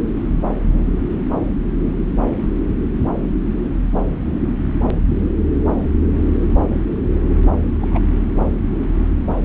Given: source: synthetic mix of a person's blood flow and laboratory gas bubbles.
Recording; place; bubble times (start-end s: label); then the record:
Doppler ultrasound of blood flow; subclavian vein
7.81-7.99 s: bubbles
From the record:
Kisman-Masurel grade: 112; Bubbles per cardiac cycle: 1 to 2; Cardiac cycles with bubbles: 1 to 10%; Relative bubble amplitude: moderate (0.250 to 0.450); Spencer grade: 1 (occasional bubble signal discernible with the cardiac motion signal, with majority of cardiac periods free of bubbles); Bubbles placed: anywhere in the cardiac cycle